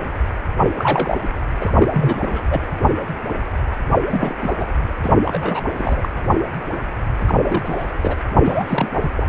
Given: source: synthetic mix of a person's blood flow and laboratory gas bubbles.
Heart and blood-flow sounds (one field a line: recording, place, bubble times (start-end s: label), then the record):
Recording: Doppler ultrasound of blood flow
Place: precordium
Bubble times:
0.78-1.17 s: bubbles
1.60-1.71 s: bubbles
1.79-1.89 s: bubbles
1.93-2.59 s: bubbles
4.10-4.35 s: bubbles
4.41-4.73 s: bubbles
5.03-5.12 s: bubbles
5.25-6.08 s: bubbles
7.27-7.35 s: bubbles
7.42-7.92 s: bubbles
8.01-8.14 s: bubbles
8.45-8.88 s: bubbles
8.93-9.09 s: bubbles
9.16-9.29 s: bubbles
From the record:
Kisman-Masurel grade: 232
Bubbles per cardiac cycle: several, 3 to 8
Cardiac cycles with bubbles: 50 to 99%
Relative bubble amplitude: moderate (0.250 to 0.450)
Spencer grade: 3 (all of the cardiac periods contain showers or single bubble signals, but not dominating or overriding the cardiac motion signals)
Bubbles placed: anywhere in the cardiac cycle